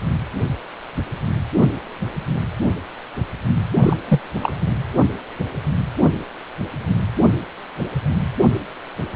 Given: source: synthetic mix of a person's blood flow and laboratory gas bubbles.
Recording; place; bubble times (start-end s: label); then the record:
Doppler ultrasound of blood flow; precordium
3.82-3.96 s: bubbles
4.08-4.20 s: bubbles
4.42-4.52 s: bubbles
From the record:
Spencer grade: 2 (many but less than half of the cardiac periods contain bubble signals, singularly or in groups); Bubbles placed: anywhere in the cardiac cycle